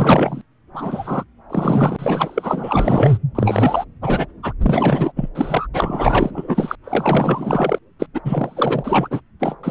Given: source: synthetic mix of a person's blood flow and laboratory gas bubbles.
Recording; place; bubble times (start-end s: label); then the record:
Doppler ultrasound of blood flow; subclavian vein
0.00-0.41 s: bubbles
0.74-1.24 s: bubbles
1.50-3.18 s: bubbles
3.35-3.85 s: bubbles
4.01-4.26 s: bubbles
4.42-4.53 s: bubbles
4.62-5.12 s: bubbles
5.16-5.29 s: bubbles
5.34-5.67 s: bubbles
5.73-6.75 s: bubbles
6.84-7.79 s: bubbles
7.99-8.07 s: bubbles
8.14-8.21 s: bubbles
8.24-9.21 s: bubbles
9.39-9.56 s: bubbles
9.63-9.71 s: bubbles
From the record:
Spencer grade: 4 (maximum detectable bubble signal sounding continuously throughout systole and diastole of every cardiac period, and overriding the amplitude of the normal cardiac signals); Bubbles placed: anywhere in the cardiac cycle